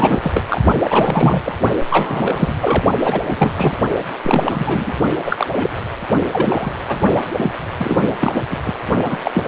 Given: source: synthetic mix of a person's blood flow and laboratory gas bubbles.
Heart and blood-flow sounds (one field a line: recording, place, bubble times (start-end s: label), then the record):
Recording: Doppler ultrasound of blood flow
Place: precordium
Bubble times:
0.00-0.20 s: bubbles
0.23-0.43 s: bubbles
0.49-0.61 s: bubbles
0.83-1.42 s: bubbles
1.46-1.55 s: bubbles
1.91-2.54 s: bubbles
2.60-2.84 s: bubbles
3.00-3.21 s: bubbles
3.24-3.75 s: bubbles
4.24-4.93 s: bubbles
5.25-5.46 s: bubbles
5.49-5.85 s: bubbles
6.31-6.71 s: bubbles
6.88-6.96 s: bubbles
7.36-7.51 s: bubbles
7.79-8.05 s: bubbles
8.20-8.40 s: bubbles
8.50-8.57 s: bubbles
8.65-8.72 s: bubbles
9.04-9.18 s: bubbles
9.24-9.48 s: bubbles
From the record:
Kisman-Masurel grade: 343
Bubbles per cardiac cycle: rolling drumbeat, 9 or more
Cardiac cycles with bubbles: 100%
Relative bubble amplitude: loud (0.450 to 0.775)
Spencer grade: 3 (all of the cardiac periods contain showers or single bubble signals, but not dominating or overriding the cardiac motion signals)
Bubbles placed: only in the low amplitude regions of the cardiac cycle